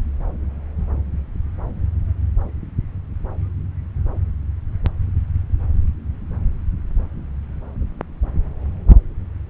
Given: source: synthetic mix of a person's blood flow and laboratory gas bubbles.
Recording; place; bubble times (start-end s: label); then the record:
Doppler ultrasound of blood flow; subclavian vein
no bubbles
From the record:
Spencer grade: 0 (complete lack of bubble signals)